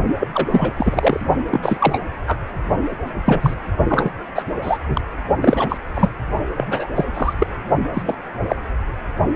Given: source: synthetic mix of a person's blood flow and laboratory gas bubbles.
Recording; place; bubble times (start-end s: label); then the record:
Doppler ultrasound of blood flow; precordium
0.19-0.28 s: bubbles
0.34-0.47 s: bubbles
0.51-0.72 s: bubbles
0.77-1.25 s: bubbles
1.50-2.00 s: bubbles
2.27-2.38 s: bubbles
3.24-3.54 s: bubbles
3.89-4.11 s: bubbles
4.35-4.42 s: bubbles
4.62-4.78 s: bubbles
4.88-5.01 s: bubbles
5.41-5.78 s: bubbles
5.94-6.09 s: bubbles
6.57-6.87 s: bubbles
6.95-7.05 s: bubbles
7.14-7.33 s: bubbles
7.39-7.46 s: bubbles
7.93-8.02 s: bubbles
8.05-8.14 s: bubbles
8.48-8.56 s: bubbles
From the record:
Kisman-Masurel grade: 243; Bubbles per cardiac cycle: several, 3 to 8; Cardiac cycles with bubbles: 100%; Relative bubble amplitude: loud (0.450 to 0.775); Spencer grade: 3 (all of the cardiac periods contain showers or single bubble signals, but not dominating or overriding the cardiac motion signals); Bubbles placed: only in the low amplitude regions of the cardiac cycle